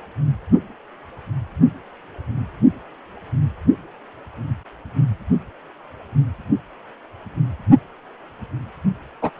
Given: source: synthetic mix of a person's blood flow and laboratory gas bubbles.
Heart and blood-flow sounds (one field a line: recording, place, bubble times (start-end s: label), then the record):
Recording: Doppler ultrasound of blood flow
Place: precordium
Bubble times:
9.21-9.31 s: bubbles
From the record:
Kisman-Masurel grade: 113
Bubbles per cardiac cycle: 1 to 2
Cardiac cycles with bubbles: 1 to 10%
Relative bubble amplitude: loud (0.450 to 0.775)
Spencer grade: 1 (occasional bubble signal discernible with the cardiac motion signal, with majority of cardiac periods free of bubbles)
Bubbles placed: only in the low amplitude regions of the cardiac cycle